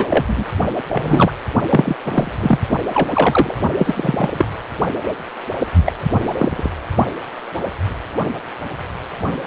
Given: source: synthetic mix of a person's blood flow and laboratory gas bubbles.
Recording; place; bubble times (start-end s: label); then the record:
Doppler ultrasound of blood flow; precordium
0.00-0.06 s: bubbles
0.10-0.45 s: bubbles
0.88-1.32 s: bubbles
1.70-1.96 s: bubbles
2.05-2.30 s: bubbles
2.40-2.58 s: bubbles
2.69-2.77 s: bubbles
2.94-3.54 s: bubbles
3.78-4.50 s: bubbles
5.85-5.93 s: bubbles
6.09-6.34 s: bubbles
6.37-6.71 s: bubbles
From the record:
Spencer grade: 3 (all of the cardiac periods contain showers or single bubble signals, but not dominating or overriding the cardiac motion signals); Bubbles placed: only in the low amplitude regions of the cardiac cycle